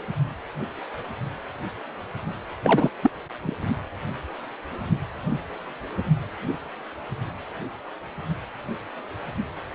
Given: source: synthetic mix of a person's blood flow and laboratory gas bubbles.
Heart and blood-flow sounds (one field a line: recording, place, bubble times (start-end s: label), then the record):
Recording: Doppler ultrasound of blood flow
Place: precordium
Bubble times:
2.63-2.90 s: bubbles
3.03-3.11 s: bubbles
3.43-3.56 s: bubbles
From the record:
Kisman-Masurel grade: 212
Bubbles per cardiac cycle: several, 3 to 8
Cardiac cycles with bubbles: 1 to 10%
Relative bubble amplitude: moderate (0.250 to 0.450)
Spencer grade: 1 (occasional bubble signal discernible with the cardiac motion signal, with majority of cardiac periods free of bubbles)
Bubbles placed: anywhere in the cardiac cycle